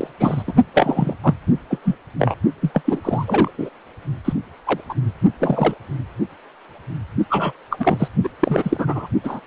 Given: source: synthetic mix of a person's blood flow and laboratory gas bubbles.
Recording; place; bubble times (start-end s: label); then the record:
Doppler ultrasound of blood flow; precordium
0.00-0.07 s: bubbles
0.20-0.44 s: bubbles
0.47-0.53 s: bubbles
0.73-1.14 s: bubbles
1.24-1.35 s: bubbles
1.70-1.80 s: bubbles
1.85-1.95 s: bubbles
2.18-2.35 s: bubbles
2.61-2.71 s: bubbles
2.74-2.81 s: bubbles
2.84-3.01 s: bubbles
3.04-3.51 s: bubbles
3.58-3.70 s: bubbles
4.25-4.33 s: bubbles
4.67-4.81 s: bubbles
4.89-4.94 s: bubbles
5.39-5.74 s: bubbles
7.30-7.52 s: bubbles
7.71-7.77 s: bubbles
7.80-8.08 s: bubbles
8.23-8.29 s: bubbles
8.39-9.07 s: bubbles
9.24-9.40 s: bubbles
From the record:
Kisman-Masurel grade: 232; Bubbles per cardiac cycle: several, 3 to 8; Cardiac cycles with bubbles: 50 to 99%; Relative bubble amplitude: moderate (0.250 to 0.450); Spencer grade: 3 (all of the cardiac periods contain showers or single bubble signals, but not dominating or overriding the cardiac motion signals); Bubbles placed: only in the low amplitude regions of the cardiac cycle